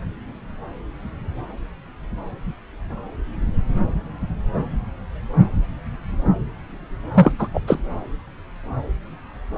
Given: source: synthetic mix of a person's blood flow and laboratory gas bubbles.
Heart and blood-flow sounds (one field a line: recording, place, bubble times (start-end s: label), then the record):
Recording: Doppler ultrasound of blood flow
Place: subclavian vein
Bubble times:
7.14-7.33 s: bubbles
7.39-7.48 s: bubbles
7.54-7.60 s: bubbles
7.67-7.79 s: bubbles
From the record:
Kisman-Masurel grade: 223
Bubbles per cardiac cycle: several, 3 to 8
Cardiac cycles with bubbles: 10 to 50%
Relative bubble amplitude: loud (0.450 to 0.775)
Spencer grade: 2 (many but less than half of the cardiac periods contain bubble signals, singularly or in groups)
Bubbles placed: anywhere in the cardiac cycle